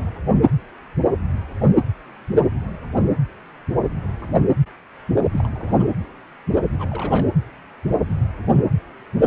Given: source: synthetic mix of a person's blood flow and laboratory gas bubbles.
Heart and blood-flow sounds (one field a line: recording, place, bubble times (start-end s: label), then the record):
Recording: Doppler ultrasound of blood flow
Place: precordium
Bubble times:
5.33-5.48 s: bubbles
5.50-5.88 s: bubbles
6.79-7.29 s: bubbles
From the record:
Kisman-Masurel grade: 221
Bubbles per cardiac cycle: several, 3 to 8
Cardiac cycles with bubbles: 10 to 50%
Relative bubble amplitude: barely perceptible (0.100 to 0.250)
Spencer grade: 2 (many but less than half of the cardiac periods contain bubble signals, singularly or in groups)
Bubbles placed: anywhere in the cardiac cycle